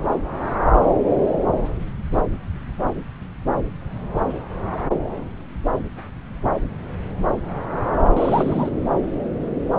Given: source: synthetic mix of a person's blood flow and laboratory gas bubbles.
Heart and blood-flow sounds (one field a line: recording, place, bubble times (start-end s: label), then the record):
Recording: Doppler ultrasound of blood flow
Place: subclavian vein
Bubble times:
8.16-8.69 s: bubbles
From the record:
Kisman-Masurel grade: 122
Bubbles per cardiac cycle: 1 to 2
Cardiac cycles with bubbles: 10 to 50%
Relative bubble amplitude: moderate (0.250 to 0.450)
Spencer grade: 2 (many but less than half of the cardiac periods contain bubble signals, singularly or in groups)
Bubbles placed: anywhere in the cardiac cycle